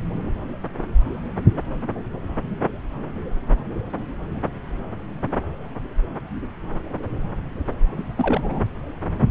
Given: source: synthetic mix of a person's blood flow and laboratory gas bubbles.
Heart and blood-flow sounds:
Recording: Doppler ultrasound of blood flow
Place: subclavian vein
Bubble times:
8.17-8.64 s: bubbles
From the record:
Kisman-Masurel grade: 211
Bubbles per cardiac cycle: several, 3 to 8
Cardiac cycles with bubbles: 1 to 10%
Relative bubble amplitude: barely perceptible (0.100 to 0.250)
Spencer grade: 1 (occasional bubble signal discernible with the cardiac motion signal, with majority of cardiac periods free of bubbles)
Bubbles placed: anywhere in the cardiac cycle

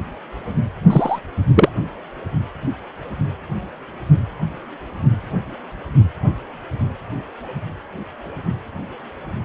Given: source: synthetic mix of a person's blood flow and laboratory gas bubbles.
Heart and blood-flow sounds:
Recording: Doppler ultrasound of blood flow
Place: precordium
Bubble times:
0.90-1.19 s: bubbles
1.55-1.69 s: bubbles
From the record:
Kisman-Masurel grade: 113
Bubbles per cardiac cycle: 1 to 2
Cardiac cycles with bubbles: 1 to 10%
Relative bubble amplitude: loud (0.450 to 0.775)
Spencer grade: 1 (occasional bubble signal discernible with the cardiac motion signal, with majority of cardiac periods free of bubbles)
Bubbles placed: only in the low amplitude regions of the cardiac cycle

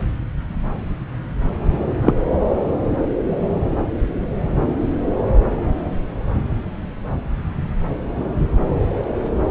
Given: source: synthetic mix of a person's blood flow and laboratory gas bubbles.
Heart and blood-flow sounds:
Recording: Doppler ultrasound of blood flow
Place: subclavian vein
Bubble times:
2.02-2.15 s: bubbles
From the record:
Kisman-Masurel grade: 123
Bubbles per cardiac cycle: 1 to 2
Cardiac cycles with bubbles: 10 to 50%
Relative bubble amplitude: loud (0.450 to 0.775)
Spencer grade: 2 (many but less than half of the cardiac periods contain bubble signals, singularly or in groups)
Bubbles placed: anywhere in the cardiac cycle

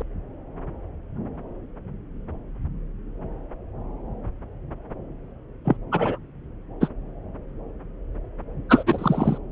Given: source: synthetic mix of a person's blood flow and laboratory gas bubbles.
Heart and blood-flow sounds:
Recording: Doppler ultrasound of blood flow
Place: subclavian vein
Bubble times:
0.00-0.02 s: bubbles
5.65-5.77 s: bubbles
5.92-6.18 s: bubbles
6.81-6.89 s: bubbles
8.69-8.83 s: bubbles
8.86-9.38 s: bubbles
From the record:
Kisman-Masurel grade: 223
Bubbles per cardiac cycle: several, 3 to 8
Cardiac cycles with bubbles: 10 to 50%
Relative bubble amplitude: loud (0.450 to 0.775)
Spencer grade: 2 (many but less than half of the cardiac periods contain bubble signals, singularly or in groups)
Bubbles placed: anywhere in the cardiac cycle

